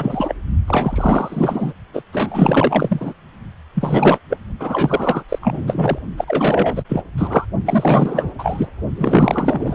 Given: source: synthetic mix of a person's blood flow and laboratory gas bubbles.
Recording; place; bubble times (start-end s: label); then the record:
Doppler ultrasound of blood flow; precordium
0.00-0.36 s: bubbles
0.68-1.73 s: bubbles
1.93-2.02 s: bubbles
2.12-3.14 s: bubbles
3.75-4.19 s: bubbles
4.29-4.38 s: bubbles
4.59-5.23 s: bubbles
5.28-5.38 s: bubbles
5.42-5.99 s: bubbles
6.17-6.25 s: bubbles
6.27-6.82 s: bubbles
6.88-7.02 s: bubbles
7.17-7.46 s: bubbles
7.64-8.34 s: bubbles
8.38-8.67 s: bubbles
8.97-9.75 s: bubbles
From the record:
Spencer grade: 4 (maximum detectable bubble signal sounding continuously throughout systole and diastole of every cardiac period, and overriding the amplitude of the normal cardiac signals); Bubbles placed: only in the low amplitude regions of the cardiac cycle